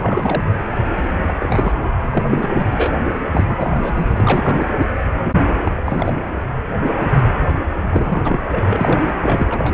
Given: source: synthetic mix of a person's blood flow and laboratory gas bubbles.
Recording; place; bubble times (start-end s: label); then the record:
Doppler ultrasound of blood flow; precordium
0.00-0.43 s: bubbles
0.86-1.09 s: bubbles
1.23-1.33 s: bubbles
1.40-1.91 s: bubbles
2.03-2.97 s: bubbles
3.32-4.11 s: bubbles
4.15-4.67 s: bubbles
5.62-5.82 s: bubbles
5.85-6.20 s: bubbles
7.88-8.40 s: bubbles
8.49-9.08 s: bubbles
9.21-9.74 s: bubbles
From the record:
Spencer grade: 3 (all of the cardiac periods contain showers or single bubble signals, but not dominating or overriding the cardiac motion signals); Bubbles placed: anywhere in the cardiac cycle